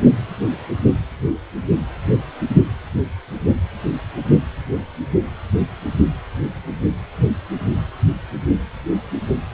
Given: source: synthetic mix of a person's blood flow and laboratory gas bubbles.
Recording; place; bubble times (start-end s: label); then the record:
Doppler ultrasound of blood flow; precordium
no bubbles
From the record:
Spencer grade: 0 (complete lack of bubble signals)